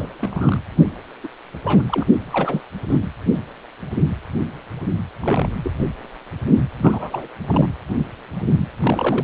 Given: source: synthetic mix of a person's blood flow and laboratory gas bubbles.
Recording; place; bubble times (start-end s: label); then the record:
Doppler ultrasound of blood flow; precordium
0.00-0.09 s: bubbles
0.18-0.62 s: bubbles
1.23-1.28 s: bubbles
1.64-1.82 s: bubbles
1.86-2.03 s: bubbles
2.30-2.61 s: bubbles
2.90-2.99 s: bubbles
5.22-5.48 s: bubbles
5.64-5.71 s: bubbles
6.78-7.28 s: bubbles
7.48-7.69 s: bubbles
8.80-9.24 s: bubbles
From the record:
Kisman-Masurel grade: 232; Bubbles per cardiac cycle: several, 3 to 8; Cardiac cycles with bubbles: 50 to 99%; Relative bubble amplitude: moderate (0.250 to 0.450); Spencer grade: 3 (all of the cardiac periods contain showers or single bubble signals, but not dominating or overriding the cardiac motion signals); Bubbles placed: anywhere in the cardiac cycle